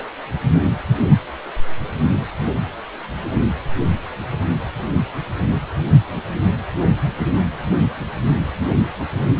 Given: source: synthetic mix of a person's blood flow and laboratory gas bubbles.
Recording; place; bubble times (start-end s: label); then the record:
Doppler ultrasound of blood flow; precordium
0.00-0.08 s: bubbles
From the record:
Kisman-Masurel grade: 121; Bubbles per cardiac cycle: 1 to 2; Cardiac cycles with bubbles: 10 to 50%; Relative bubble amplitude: barely perceptible (0.100 to 0.250); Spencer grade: 2 (many but less than half of the cardiac periods contain bubble signals, singularly or in groups); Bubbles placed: only in the low amplitude regions of the cardiac cycle